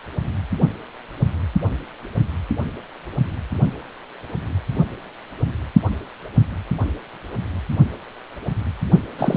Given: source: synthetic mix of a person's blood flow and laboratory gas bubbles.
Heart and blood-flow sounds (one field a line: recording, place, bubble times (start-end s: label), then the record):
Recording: Doppler ultrasound of blood flow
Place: precordium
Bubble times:
9.18-9.37 s: bubbles
From the record:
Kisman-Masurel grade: 212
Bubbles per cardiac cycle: several, 3 to 8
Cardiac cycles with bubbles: 1 to 10%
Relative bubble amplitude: moderate (0.250 to 0.450)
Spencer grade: 1 (occasional bubble signal discernible with the cardiac motion signal, with majority of cardiac periods free of bubbles)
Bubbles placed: only in the low amplitude regions of the cardiac cycle